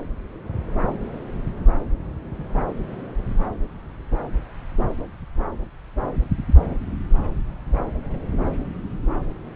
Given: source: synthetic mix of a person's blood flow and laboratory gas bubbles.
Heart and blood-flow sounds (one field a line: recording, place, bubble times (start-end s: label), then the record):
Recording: Doppler ultrasound of blood flow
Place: subclavian vein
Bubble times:
no bubbles
From the record:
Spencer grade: 0 (complete lack of bubble signals)